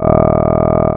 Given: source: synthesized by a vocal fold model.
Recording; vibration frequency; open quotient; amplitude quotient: sustained vowel; 40 Hz; 0.2; 1.2